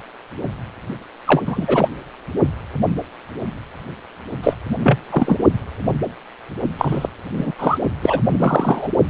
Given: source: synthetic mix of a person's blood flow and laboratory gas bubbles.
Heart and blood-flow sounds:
Doppler ultrasound of blood flow; precordium
1.26-1.43 s: bubbles
1.45-1.89 s: bubbles
4.42-4.54 s: bubbles
4.83-4.98 s: bubbles
5.10-5.39 s: bubbles
6.77-7.08 s: bubbles
7.37-7.52 s: bubbles
7.58-7.78 s: bubbles
8.02-8.21 s: bubbles
8.29-8.88 s: bubbles
From the record:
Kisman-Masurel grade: 233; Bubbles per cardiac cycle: several, 3 to 8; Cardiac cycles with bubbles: 50 to 99%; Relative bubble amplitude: loud (0.450 to 0.775); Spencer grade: 3 (all of the cardiac periods contain showers or single bubble signals, but not dominating or overriding the cardiac motion signals); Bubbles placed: only in the low amplitude regions of the cardiac cycle

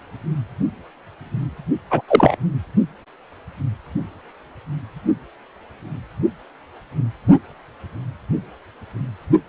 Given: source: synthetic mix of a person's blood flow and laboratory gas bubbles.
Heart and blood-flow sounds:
Doppler ultrasound of blood flow; precordium
1.90-2.01 s: bubbles
2.08-2.36 s: bubbles
From the record:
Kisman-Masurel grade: 223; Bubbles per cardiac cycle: several, 3 to 8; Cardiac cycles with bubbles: 10 to 50%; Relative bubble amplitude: loud (0.450 to 0.775); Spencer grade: 2 (many but less than half of the cardiac periods contain bubble signals, singularly or in groups); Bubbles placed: only in the low amplitude regions of the cardiac cycle

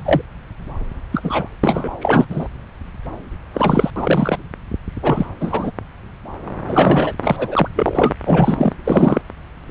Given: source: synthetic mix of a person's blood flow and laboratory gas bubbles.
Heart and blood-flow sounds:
Doppler ultrasound of blood flow; subclavian vein
0.00-0.22 s: bubbles
1.11-1.56 s: bubbles
1.63-1.89 s: bubbles
2.01-2.25 s: bubbles
2.29-2.48 s: bubbles
3.54-3.90 s: bubbles
3.95-4.38 s: bubbles
5.02-5.26 s: bubbles
5.40-5.71 s: bubbles
6.67-7.13 s: bubbles
7.24-7.68 s: bubbles
7.75-8.13 s: bubbles
8.25-8.73 s: bubbles
8.84-9.21 s: bubbles
From the record:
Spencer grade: 3 (all of the cardiac periods contain showers or single bubble signals, but not dominating or overriding the cardiac motion signals); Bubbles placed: anywhere in the cardiac cycle

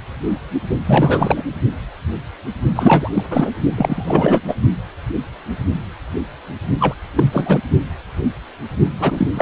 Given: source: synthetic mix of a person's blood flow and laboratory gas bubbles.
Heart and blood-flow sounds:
Doppler ultrasound of blood flow; precordium
0.85-1.44 s: bubbles
2.75-3.11 s: bubbles
3.13-3.24 s: bubbles
3.30-3.51 s: bubbles
3.75-4.41 s: bubbles
4.47-4.55 s: bubbles
6.79-6.94 s: bubbles
7.15-7.60 s: bubbles
8.99-9.28 s: bubbles
9.34-9.42 s: bubbles
From the record:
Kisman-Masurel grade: 333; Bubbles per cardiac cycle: rolling drumbeat, 9 or more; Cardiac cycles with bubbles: 50 to 99%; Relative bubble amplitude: loud (0.450 to 0.775); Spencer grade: 3 (all of the cardiac periods contain showers or single bubble signals, but not dominating or overriding the cardiac motion signals); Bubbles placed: only in the low amplitude regions of the cardiac cycle

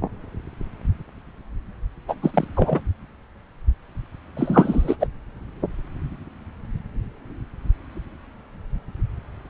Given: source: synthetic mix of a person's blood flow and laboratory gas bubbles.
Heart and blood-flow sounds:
Doppler ultrasound of blood flow; subclavian vein
2.08-2.15 s: bubbles
2.22-2.31 s: bubbles
2.33-2.45 s: bubbles
2.57-2.80 s: bubbles
4.36-4.96 s: bubbles
5.00-5.07 s: bubbles
From the record:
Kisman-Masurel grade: 223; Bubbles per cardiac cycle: several, 3 to 8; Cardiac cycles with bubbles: 10 to 50%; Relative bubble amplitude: loud (0.450 to 0.775); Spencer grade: 2 (many but less than half of the cardiac periods contain bubble signals, singularly or in groups); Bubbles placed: anywhere in the cardiac cycle

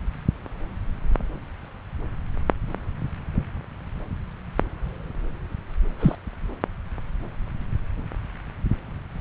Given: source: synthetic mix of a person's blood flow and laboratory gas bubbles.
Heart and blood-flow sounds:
Doppler ultrasound of blood flow; subclavian vein
6.00-6.15 s: bubbles
From the record:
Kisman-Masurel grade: 112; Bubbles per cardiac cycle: 1 to 2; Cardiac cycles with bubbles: 1 to 10%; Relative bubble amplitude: moderate (0.250 to 0.450); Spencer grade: 1 (occasional bubble signal discernible with the cardiac motion signal, with majority of cardiac periods free of bubbles); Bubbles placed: anywhere in the cardiac cycle

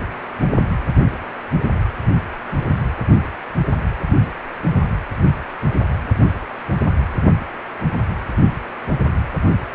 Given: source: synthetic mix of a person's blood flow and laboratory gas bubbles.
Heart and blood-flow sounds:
Doppler ultrasound of blood flow; precordium
no bubbles
From the record:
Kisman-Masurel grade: 000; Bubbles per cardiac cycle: 0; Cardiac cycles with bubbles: 0%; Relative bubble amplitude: no bubbles discernible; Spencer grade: 0 (complete lack of bubble signals)

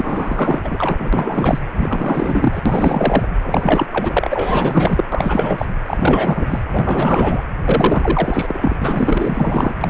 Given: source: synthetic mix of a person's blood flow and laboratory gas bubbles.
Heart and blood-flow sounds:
Doppler ultrasound of blood flow; precordium
0.00-1.59 s: bubbles
1.77-2.61 s: bubbles
2.65-3.27 s: bubbles
3.44-3.88 s: bubbles
3.91-4.28 s: bubbles
4.30-5.04 s: bubbles
5.12-5.66 s: bubbles
5.88-6.46 s: bubbles
6.50-6.59 s: bubbles
6.70-7.42 s: bubbles
7.64-8.77 s: bubbles
8.81-9.75 s: bubbles
9.81-9.90 s: bubbles
From the record:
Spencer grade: 4 (maximum detectable bubble signal sounding continuously throughout systole and diastole of every cardiac period, and overriding the amplitude of the normal cardiac signals); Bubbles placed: anywhere in the cardiac cycle

